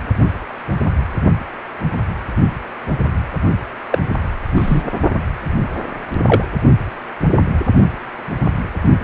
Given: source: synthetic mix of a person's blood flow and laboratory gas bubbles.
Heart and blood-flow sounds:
Doppler ultrasound of blood flow; precordium
3.91-3.99 s: bubbles
4.55-4.83 s: bubbles
6.26-6.44 s: bubbles
From the record:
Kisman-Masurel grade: 123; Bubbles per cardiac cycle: 1 to 2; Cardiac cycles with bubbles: 10 to 50%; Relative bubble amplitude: loud (0.450 to 0.775); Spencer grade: 2 (many but less than half of the cardiac periods contain bubble signals, singularly or in groups); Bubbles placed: only in the low amplitude regions of the cardiac cycle

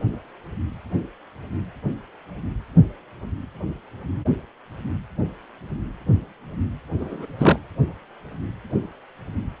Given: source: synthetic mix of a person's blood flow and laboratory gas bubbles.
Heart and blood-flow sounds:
Doppler ultrasound of blood flow; precordium
7.00-7.25 s: bubbles
7.39-7.59 s: bubbles
From the record:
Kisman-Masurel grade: 212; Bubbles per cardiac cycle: several, 3 to 8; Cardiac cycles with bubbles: 1 to 10%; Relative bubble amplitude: moderate (0.250 to 0.450); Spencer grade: 1 (occasional bubble signal discernible with the cardiac motion signal, with majority of cardiac periods free of bubbles); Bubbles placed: anywhere in the cardiac cycle

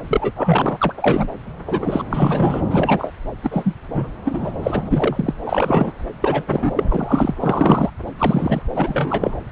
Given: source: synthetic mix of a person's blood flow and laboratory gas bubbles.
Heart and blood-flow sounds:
Doppler ultrasound of blood flow; subclavian vein
0.08-0.32 s: bubbles
0.35-0.78 s: bubbles
0.81-0.93 s: bubbles
0.97-1.29 s: bubbles
1.67-2.04 s: bubbles
2.10-2.62 s: bubbles
2.70-3.13 s: bubbles
3.43-3.74 s: bubbles
3.94-4.09 s: bubbles
4.25-4.52 s: bubbles
4.62-4.83 s: bubbles
4.86-5.33 s: bubbles
5.45-5.92 s: bubbles
6.21-6.83 s: bubbles
6.88-7.34 s: bubbles
7.40-7.90 s: bubbles
8.18-8.62 s: bubbles
8.74-9.35 s: bubbles
From the record:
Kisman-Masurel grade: 243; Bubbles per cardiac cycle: several, 3 to 8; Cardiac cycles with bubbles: 100%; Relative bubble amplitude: loud (0.450 to 0.775); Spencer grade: 3 (all of the cardiac periods contain showers or single bubble signals, but not dominating or overriding the cardiac motion signals); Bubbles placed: anywhere in the cardiac cycle

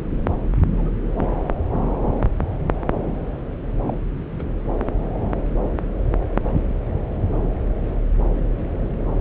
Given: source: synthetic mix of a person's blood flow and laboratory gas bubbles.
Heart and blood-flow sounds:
Doppler ultrasound of blood flow; subclavian vein
0.75-0.95 s: bubbles
3.88-3.97 s: bubbles
4.38-4.43 s: bubbles
From the record:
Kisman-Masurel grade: 121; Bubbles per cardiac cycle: 1 to 2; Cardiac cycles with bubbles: 10 to 50%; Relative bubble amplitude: barely perceptible (0.100 to 0.250); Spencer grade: 2 (many but less than half of the cardiac periods contain bubble signals, singularly or in groups); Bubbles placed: anywhere in the cardiac cycle

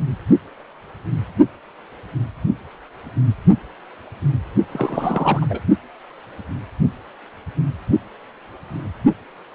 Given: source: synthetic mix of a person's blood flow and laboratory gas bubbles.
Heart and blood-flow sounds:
Doppler ultrasound of blood flow; precordium
4.73-5.46 s: bubbles
5.50-5.61 s: bubbles
From the record:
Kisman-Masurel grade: 212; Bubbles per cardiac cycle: several, 3 to 8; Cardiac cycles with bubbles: 1 to 10%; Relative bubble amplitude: moderate (0.250 to 0.450); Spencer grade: 1 (occasional bubble signal discernible with the cardiac motion signal, with majority of cardiac periods free of bubbles); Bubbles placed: only in the low amplitude regions of the cardiac cycle

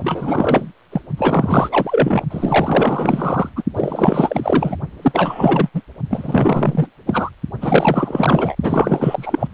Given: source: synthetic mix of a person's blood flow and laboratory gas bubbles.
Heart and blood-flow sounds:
Doppler ultrasound of blood flow; precordium
0.04-0.72 s: bubbles
0.92-1.01 s: bubbles
1.17-2.23 s: bubbles
2.30-3.49 s: bubbles
3.56-3.62 s: bubbles
3.74-4.76 s: bubbles
5.02-5.69 s: bubbles
5.74-5.82 s: bubbles
6.10-6.87 s: bubbles
7.06-7.30 s: bubbles
7.61-8.55 s: bubbles
8.62-9.47 s: bubbles
From the record:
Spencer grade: 4 (maximum detectable bubble signal sounding continuously throughout systole and diastole of every cardiac period, and overriding the amplitude of the normal cardiac signals); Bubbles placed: only in the low amplitude regions of the cardiac cycle

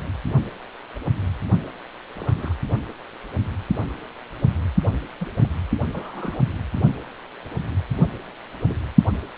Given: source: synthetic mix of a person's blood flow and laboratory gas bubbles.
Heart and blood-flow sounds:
Doppler ultrasound of blood flow; precordium
2.17-2.54 s: bubbles
5.21-5.26 s: bubbles
5.39-5.49 s: bubbles
5.92-6.40 s: bubbles
8.64-8.79 s: bubbles
From the record:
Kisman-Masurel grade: 121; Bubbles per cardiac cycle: 1 to 2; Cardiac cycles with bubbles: 10 to 50%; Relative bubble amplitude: barely perceptible (0.100 to 0.250); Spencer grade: 2 (many but less than half of the cardiac periods contain bubble signals, singularly or in groups); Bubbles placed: only in the low amplitude regions of the cardiac cycle

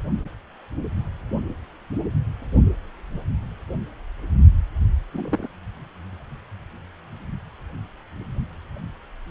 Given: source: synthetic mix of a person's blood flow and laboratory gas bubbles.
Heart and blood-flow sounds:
Doppler ultrasound of blood flow; precordium
5.13-5.47 s: bubbles
From the record:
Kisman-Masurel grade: 112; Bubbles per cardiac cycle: 1 to 2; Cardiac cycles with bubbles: 1 to 10%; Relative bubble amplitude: moderate (0.250 to 0.450); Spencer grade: 1 (occasional bubble signal discernible with the cardiac motion signal, with majority of cardiac periods free of bubbles); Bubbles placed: only in the low amplitude regions of the cardiac cycle

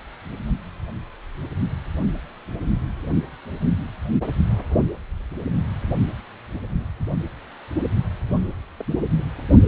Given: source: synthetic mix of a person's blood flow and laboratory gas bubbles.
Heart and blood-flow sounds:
Doppler ultrasound of blood flow; precordium
6.66-6.90 s: bubbles
8.79-8.83 s: bubbles
9.18-9.22 s: bubbles
From the record:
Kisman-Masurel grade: 121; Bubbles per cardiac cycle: 1 to 2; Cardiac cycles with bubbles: 10 to 50%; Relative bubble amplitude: barely perceptible (0.100 to 0.250); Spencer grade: 2 (many but less than half of the cardiac periods contain bubble signals, singularly or in groups); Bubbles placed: only in the low amplitude regions of the cardiac cycle

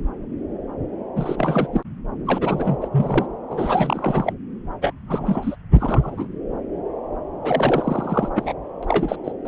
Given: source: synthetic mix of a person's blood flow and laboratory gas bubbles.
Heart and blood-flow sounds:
Doppler ultrasound of blood flow; subclavian vein
1.16-1.67 s: bubbles
1.73-1.83 s: bubbles
2.25-2.77 s: bubbles
2.81-2.88 s: bubbles
2.92-3.27 s: bubbles
3.50-4.33 s: bubbles
4.81-4.92 s: bubbles
5.07-5.55 s: bubbles
5.74-6.28 s: bubbles
7.43-8.29 s: bubbles
8.35-8.53 s: bubbles
8.82-8.85 s: bubbles
8.88-9.16 s: bubbles
9.24-9.32 s: bubbles
9.45-9.48 s: bubbles
From the record:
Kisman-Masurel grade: 332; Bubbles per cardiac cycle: rolling drumbeat, 9 or more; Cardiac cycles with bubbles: 50 to 99%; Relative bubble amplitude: moderate (0.250 to 0.450); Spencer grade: 3 (all of the cardiac periods contain showers or single bubble signals, but not dominating or overriding the cardiac motion signals); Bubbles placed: anywhere in the cardiac cycle

